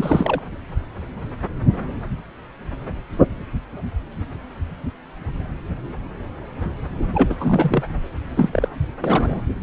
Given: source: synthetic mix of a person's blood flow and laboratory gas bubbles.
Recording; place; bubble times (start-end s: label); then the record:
Doppler ultrasound of blood flow; subclavian vein
0.00-0.42 s: bubbles
7.14-7.36 s: bubbles
7.40-7.83 s: bubbles
8.27-8.70 s: bubbles
9.04-9.41 s: bubbles
From the record:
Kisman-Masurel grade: 222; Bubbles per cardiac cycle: several, 3 to 8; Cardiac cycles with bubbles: 10 to 50%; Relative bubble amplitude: moderate (0.250 to 0.450); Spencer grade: 2 (many but less than half of the cardiac periods contain bubble signals, singularly or in groups); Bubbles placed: anywhere in the cardiac cycle